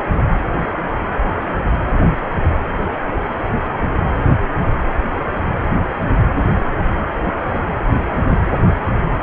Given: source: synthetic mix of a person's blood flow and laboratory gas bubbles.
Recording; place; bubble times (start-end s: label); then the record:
Doppler ultrasound of blood flow; precordium
no bubbles
From the record:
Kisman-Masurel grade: 000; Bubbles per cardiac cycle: 0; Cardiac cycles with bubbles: 0%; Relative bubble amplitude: no bubbles discernible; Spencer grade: 0 (complete lack of bubble signals)